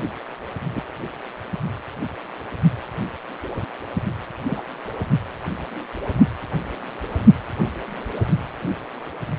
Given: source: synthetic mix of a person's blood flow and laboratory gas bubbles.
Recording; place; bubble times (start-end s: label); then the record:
Doppler ultrasound of blood flow; precordium
0.76-0.82 s: bubbles
4.46-4.61 s: bubbles
From the record:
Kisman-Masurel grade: 122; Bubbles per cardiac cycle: 1 to 2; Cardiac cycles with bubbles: 10 to 50%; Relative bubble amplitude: moderate (0.250 to 0.450); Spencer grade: 2 (many but less than half of the cardiac periods contain bubble signals, singularly or in groups); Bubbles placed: only in the low amplitude regions of the cardiac cycle